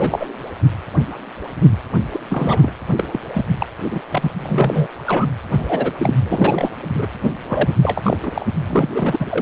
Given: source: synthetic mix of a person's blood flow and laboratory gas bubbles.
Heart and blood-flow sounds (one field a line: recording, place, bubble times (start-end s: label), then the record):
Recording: Doppler ultrasound of blood flow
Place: precordium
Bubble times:
0.00-0.28 s: bubbles
2.11-2.21 s: bubbles
2.29-2.71 s: bubbles
2.97-3.05 s: bubbles
3.12-3.20 s: bubbles
3.33-3.46 s: bubbles
3.59-3.67 s: bubbles
3.90-4.00 s: bubbles
4.11-4.31 s: bubbles
4.40-4.88 s: bubbles
5.05-5.26 s: bubbles
5.50-5.92 s: bubbles
5.97-6.14 s: bubbles
6.23-6.70 s: bubbles
6.96-7.06 s: bubbles
7.47-7.74 s: bubbles
7.82-8.17 s: bubbles
8.20-8.31 s: bubbles
8.34-8.46 s: bubbles
8.66-8.89 s: bubbles
8.95-9.42 s: bubbles
From the record:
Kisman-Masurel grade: 332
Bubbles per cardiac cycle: rolling drumbeat, 9 or more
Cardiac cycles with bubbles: 50 to 99%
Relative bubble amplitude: moderate (0.250 to 0.450)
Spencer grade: 3 (all of the cardiac periods contain showers or single bubble signals, but not dominating or overriding the cardiac motion signals)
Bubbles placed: anywhere in the cardiac cycle